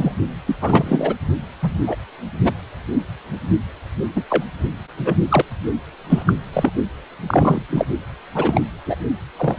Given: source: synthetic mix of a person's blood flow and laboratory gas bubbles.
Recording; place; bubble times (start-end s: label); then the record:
Doppler ultrasound of blood flow; precordium
0.00-0.13 s: bubbles
0.47-0.55 s: bubbles
0.61-1.15 s: bubbles
1.62-1.81 s: bubbles
1.87-1.96 s: bubbles
2.44-2.53 s: bubbles
4.15-4.23 s: bubbles
4.29-4.44 s: bubbles
4.98-5.16 s: bubbles
5.29-5.42 s: bubbles
6.09-6.23 s: bubbles
6.27-6.34 s: bubbles
6.53-6.71 s: bubbles
7.27-7.62 s: bubbles
7.70-7.86 s: bubbles
8.34-8.62 s: bubbles
8.86-8.96 s: bubbles
9.37-9.56 s: bubbles
From the record:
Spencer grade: 3 (all of the cardiac periods contain showers or single bubble signals, but not dominating or overriding the cardiac motion signals); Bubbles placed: anywhere in the cardiac cycle